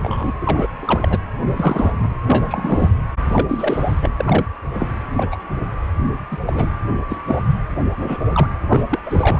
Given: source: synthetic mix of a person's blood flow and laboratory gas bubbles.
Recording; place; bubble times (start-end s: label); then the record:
Doppler ultrasound of blood flow; precordium
0.00-0.33 s: bubbles
0.41-0.67 s: bubbles
0.82-1.19 s: bubbles
1.52-1.92 s: bubbles
2.02-2.08 s: bubbles
2.23-2.92 s: bubbles
3.25-4.10 s: bubbles
4.20-4.46 s: bubbles
4.73-4.88 s: bubbles
5.17-5.39 s: bubbles
6.31-6.38 s: bubbles
6.46-6.71 s: bubbles
7.10-7.22 s: bubbles
7.28-7.40 s: bubbles
7.96-8.24 s: bubbles
8.33-8.47 s: bubbles
8.70-8.84 s: bubbles
8.90-8.99 s: bubbles
9.05-9.39 s: bubbles
From the record:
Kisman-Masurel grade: 243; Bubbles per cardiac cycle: several, 3 to 8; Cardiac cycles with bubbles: 100%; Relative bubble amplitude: loud (0.450 to 0.775); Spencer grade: 3 (all of the cardiac periods contain showers or single bubble signals, but not dominating or overriding the cardiac motion signals); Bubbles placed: anywhere in the cardiac cycle